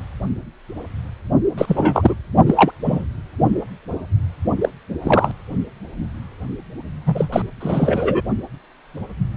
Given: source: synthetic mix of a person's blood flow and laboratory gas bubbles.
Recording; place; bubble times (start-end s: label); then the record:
Doppler ultrasound of blood flow; precordium
1.58-2.15 s: bubbles
2.46-2.72 s: bubbles
2.83-3.05 s: bubbles
4.61-4.69 s: bubbles
5.02-5.31 s: bubbles
7.06-7.27 s: bubbles
7.32-7.42 s: bubbles
7.60-8.21 s: bubbles
From the record:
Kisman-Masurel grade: 223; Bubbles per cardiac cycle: several, 3 to 8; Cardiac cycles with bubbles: 10 to 50%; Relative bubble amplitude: loud (0.450 to 0.775); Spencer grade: 2 (many but less than half of the cardiac periods contain bubble signals, singularly or in groups); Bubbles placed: only in the low amplitude regions of the cardiac cycle